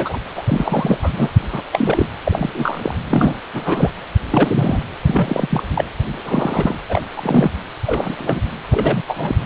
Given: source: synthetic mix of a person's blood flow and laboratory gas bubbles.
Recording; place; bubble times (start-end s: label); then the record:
Doppler ultrasound of blood flow; precordium
0.00-0.19 s: bubbles
0.36-0.43 s: bubbles
0.46-0.98 s: bubbles
1.02-1.10 s: bubbles
1.12-1.30 s: bubbles
1.52-1.62 s: bubbles
1.73-2.06 s: bubbles
2.24-2.94 s: bubbles
3.09-3.37 s: bubbles
3.53-3.90 s: bubbles
4.30-4.84 s: bubbles
5.04-5.63 s: bubbles
5.73-5.84 s: bubbles
6.25-6.75 s: bubbles
6.88-7.01 s: bubbles
7.17-7.50 s: bubbles
7.86-8.41 s: bubbles
8.71-9.02 s: bubbles
9.07-9.36 s: bubbles
From the record:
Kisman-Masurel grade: 242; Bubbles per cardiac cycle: several, 3 to 8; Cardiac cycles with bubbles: 100%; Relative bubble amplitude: moderate (0.250 to 0.450); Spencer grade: 3 (all of the cardiac periods contain showers or single bubble signals, but not dominating or overriding the cardiac motion signals); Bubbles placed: anywhere in the cardiac cycle